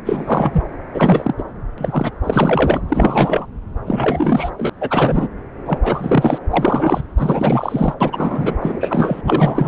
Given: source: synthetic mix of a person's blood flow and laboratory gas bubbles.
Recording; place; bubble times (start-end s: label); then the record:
Doppler ultrasound of blood flow; subclavian vein
0.04-0.63 s: bubbles
0.94-1.33 s: bubbles
1.38-1.43 s: bubbles
1.78-2.11 s: bubbles
2.23-2.81 s: bubbles
2.88-3.46 s: bubbles
3.86-4.50 s: bubbles
4.57-4.70 s: bubbles
4.80-5.29 s: bubbles
5.65-5.79 s: bubbles
5.82-6.38 s: bubbles
6.51-7.01 s: bubbles
7.18-7.94 s: bubbles
8.01-8.56 s: bubbles
8.61-9.21 s: bubbles
9.25-9.68 s: bubbles
From the record:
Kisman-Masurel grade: 343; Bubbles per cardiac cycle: rolling drumbeat, 9 or more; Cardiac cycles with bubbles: 100%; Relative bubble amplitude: loud (0.450 to 0.775); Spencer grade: 3 (all of the cardiac periods contain showers or single bubble signals, but not dominating or overriding the cardiac motion signals); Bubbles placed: anywhere in the cardiac cycle